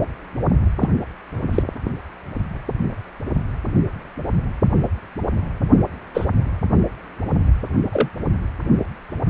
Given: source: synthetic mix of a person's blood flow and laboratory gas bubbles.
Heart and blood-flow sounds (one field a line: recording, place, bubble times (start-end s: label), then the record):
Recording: Doppler ultrasound of blood flow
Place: precordium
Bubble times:
0.78-0.89 s: bubbles
1.51-1.63 s: bubbles
6.14-6.26 s: bubbles
7.91-8.08 s: bubbles
From the record:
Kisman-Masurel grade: 122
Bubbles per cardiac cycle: 1 to 2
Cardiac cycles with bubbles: 10 to 50%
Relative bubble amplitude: moderate (0.250 to 0.450)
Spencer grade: 2 (many but less than half of the cardiac periods contain bubble signals, singularly or in groups)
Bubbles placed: anywhere in the cardiac cycle